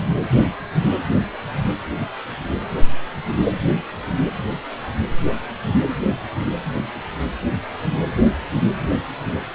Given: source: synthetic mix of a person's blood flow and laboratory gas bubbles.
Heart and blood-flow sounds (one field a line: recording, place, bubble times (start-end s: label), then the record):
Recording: Doppler ultrasound of blood flow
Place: precordium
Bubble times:
no bubbles
From the record:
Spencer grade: 0 (complete lack of bubble signals)